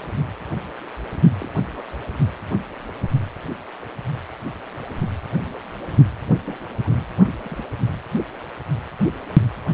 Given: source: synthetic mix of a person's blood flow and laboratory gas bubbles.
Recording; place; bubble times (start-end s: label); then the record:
Doppler ultrasound of blood flow; precordium
1.41-1.49 s: bubbles
1.60-1.86 s: bubbles
6.44-6.55 s: bubbles
6.83-6.91 s: bubbles
7.40-7.65 s: bubbles
From the record:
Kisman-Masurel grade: 121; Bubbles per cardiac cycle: 1 to 2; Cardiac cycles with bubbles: 10 to 50%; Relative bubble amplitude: barely perceptible (0.100 to 0.250); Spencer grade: 2 (many but less than half of the cardiac periods contain bubble signals, singularly or in groups); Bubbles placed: only in the low amplitude regions of the cardiac cycle